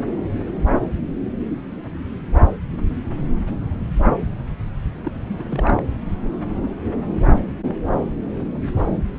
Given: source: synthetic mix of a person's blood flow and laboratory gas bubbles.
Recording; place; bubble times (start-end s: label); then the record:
Doppler ultrasound of blood flow; subclavian vein
5.03-5.80 s: bubbles
From the record:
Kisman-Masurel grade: 221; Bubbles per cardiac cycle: several, 3 to 8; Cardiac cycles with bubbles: 10 to 50%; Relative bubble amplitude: barely perceptible (0.100 to 0.250); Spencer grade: 2 (many but less than half of the cardiac periods contain bubble signals, singularly or in groups); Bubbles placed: anywhere in the cardiac cycle